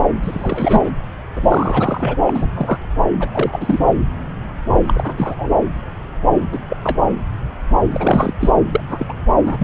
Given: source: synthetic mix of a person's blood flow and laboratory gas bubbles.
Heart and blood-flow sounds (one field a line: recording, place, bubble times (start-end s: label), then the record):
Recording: Doppler ultrasound of blood flow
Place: subclavian vein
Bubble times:
0.22-0.81 s: bubbles
0.84-0.91 s: bubbles
1.35-2.16 s: bubbles
2.26-2.47 s: bubbles
2.54-2.78 s: bubbles
3.19-3.79 s: bubbles
4.87-5.35 s: bubbles
5.38-5.50 s: bubbles
6.52-6.59 s: bubbles
6.69-6.77 s: bubbles
6.83-6.99 s: bubbles
7.91-8.34 s: bubbles
8.40-8.51 s: bubbles
8.71-8.80 s: bubbles
8.89-9.12 s: bubbles
9.45-9.64 s: bubbles
From the record:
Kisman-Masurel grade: 232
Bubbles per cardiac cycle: several, 3 to 8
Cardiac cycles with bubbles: 50 to 99%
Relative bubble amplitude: moderate (0.250 to 0.450)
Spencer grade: 3 (all of the cardiac periods contain showers or single bubble signals, but not dominating or overriding the cardiac motion signals)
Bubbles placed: anywhere in the cardiac cycle